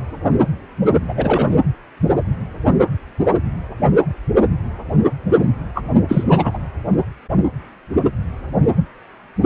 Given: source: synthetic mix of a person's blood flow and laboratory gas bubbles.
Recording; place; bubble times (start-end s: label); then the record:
Doppler ultrasound of blood flow; precordium
1.08-1.60 s: bubbles
5.75-5.84 s: bubbles
6.08-6.24 s: bubbles
6.28-6.58 s: bubbles
From the record:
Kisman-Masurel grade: 213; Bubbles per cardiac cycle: several, 3 to 8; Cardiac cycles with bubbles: 1 to 10%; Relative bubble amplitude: loud (0.450 to 0.775); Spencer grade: 1 (occasional bubble signal discernible with the cardiac motion signal, with majority of cardiac periods free of bubbles); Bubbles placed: anywhere in the cardiac cycle